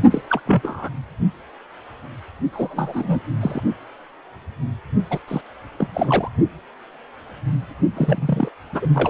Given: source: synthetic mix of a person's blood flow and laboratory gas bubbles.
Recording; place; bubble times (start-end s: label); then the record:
Doppler ultrasound of blood flow; precordium
0.11-0.22 s: bubbles
0.28-0.40 s: bubbles
0.46-0.89 s: bubbles
2.52-3.20 s: bubbles
3.41-3.61 s: bubbles
5.10-5.19 s: bubbles
5.28-5.41 s: bubbles
5.79-5.88 s: bubbles
5.93-6.29 s: bubbles
7.96-8.48 s: bubbles
8.72-8.87 s: bubbles
8.94-9.09 s: bubbles
From the record:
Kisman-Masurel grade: 232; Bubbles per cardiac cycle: several, 3 to 8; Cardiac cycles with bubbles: 50 to 99%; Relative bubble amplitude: moderate (0.250 to 0.450); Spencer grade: 3 (all of the cardiac periods contain showers or single bubble signals, but not dominating or overriding the cardiac motion signals); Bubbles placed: only in the low amplitude regions of the cardiac cycle